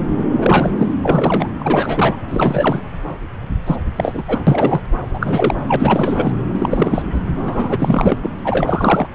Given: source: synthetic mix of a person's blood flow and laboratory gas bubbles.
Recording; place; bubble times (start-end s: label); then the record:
Doppler ultrasound of blood flow; subclavian vein
0.38-0.73 s: bubbles
0.78-0.92 s: bubbles
1.03-1.49 s: bubbles
1.58-2.17 s: bubbles
2.31-2.81 s: bubbles
3.66-3.76 s: bubbles
3.96-4.23 s: bubbles
4.28-4.44 s: bubbles
4.46-4.81 s: bubbles
5.13-5.55 s: bubbles
5.67-5.76 s: bubbles
5.79-6.32 s: bubbles
6.54-7.02 s: bubbles
7.13-7.21 s: bubbles
7.44-8.18 s: bubbles
8.22-8.30 s: bubbles
8.44-9.07 s: bubbles
From the record:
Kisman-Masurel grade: 333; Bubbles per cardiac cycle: rolling drumbeat, 9 or more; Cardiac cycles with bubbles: 50 to 99%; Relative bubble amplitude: loud (0.450 to 0.775); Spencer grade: 3 (all of the cardiac periods contain showers or single bubble signals, but not dominating or overriding the cardiac motion signals); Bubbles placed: anywhere in the cardiac cycle